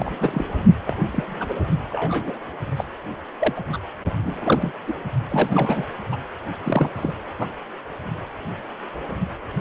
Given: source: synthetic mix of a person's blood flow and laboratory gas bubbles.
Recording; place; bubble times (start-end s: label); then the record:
Doppler ultrasound of blood flow; precordium
0.00-0.14 s: bubbles
0.20-0.46 s: bubbles
0.86-0.97 s: bubbles
1.11-1.24 s: bubbles
1.40-1.54 s: bubbles
1.91-2.36 s: bubbles
2.76-2.84 s: bubbles
3.40-3.53 s: bubbles
3.55-3.61 s: bubbles
3.72-3.78 s: bubbles
4.24-4.72 s: bubbles
4.87-4.94 s: bubbles
5.29-5.83 s: bubbles
6.12-6.16 s: bubbles
6.65-6.89 s: bubbles
6.96-7.12 s: bubbles
7.38-7.46 s: bubbles
From the record:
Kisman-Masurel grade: 232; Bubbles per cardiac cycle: several, 3 to 8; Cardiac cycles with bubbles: 50 to 99%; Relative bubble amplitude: moderate (0.250 to 0.450); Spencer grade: 3 (all of the cardiac periods contain showers or single bubble signals, but not dominating or overriding the cardiac motion signals); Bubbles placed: only in the low amplitude regions of the cardiac cycle